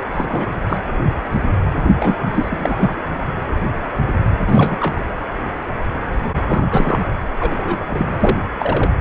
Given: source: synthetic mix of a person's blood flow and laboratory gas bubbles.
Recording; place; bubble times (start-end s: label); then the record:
Doppler ultrasound of blood flow; precordium
0.15-0.46 s: bubbles
0.69-0.77 s: bubbles
1.98-2.16 s: bubbles
2.33-2.97 s: bubbles
4.46-5.01 s: bubbles
6.47-7.01 s: bubbles
7.39-8.38 s: bubbles
8.59-8.91 s: bubbles
From the record:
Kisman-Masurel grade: 232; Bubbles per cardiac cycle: several, 3 to 8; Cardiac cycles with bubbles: 50 to 99%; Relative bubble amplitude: moderate (0.250 to 0.450); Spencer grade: 3 (all of the cardiac periods contain showers or single bubble signals, but not dominating or overriding the cardiac motion signals); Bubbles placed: anywhere in the cardiac cycle